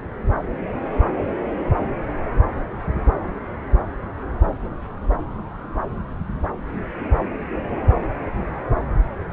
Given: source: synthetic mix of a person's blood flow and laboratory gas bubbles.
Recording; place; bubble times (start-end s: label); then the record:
Doppler ultrasound of blood flow; subclavian vein
no bubbles
From the record:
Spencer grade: 0 (complete lack of bubble signals)